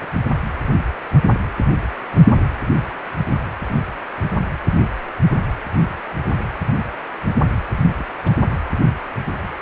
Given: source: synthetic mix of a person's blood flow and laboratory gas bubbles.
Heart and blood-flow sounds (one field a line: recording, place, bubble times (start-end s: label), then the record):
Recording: Doppler ultrasound of blood flow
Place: precordium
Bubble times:
7.96-8.06 s: bubbles
8.23-8.36 s: bubbles
From the record:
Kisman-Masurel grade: 111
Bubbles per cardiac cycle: 1 to 2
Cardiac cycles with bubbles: 1 to 10%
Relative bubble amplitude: barely perceptible (0.100 to 0.250)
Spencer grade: 1 (occasional bubble signal discernible with the cardiac motion signal, with majority of cardiac periods free of bubbles)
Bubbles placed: anywhere in the cardiac cycle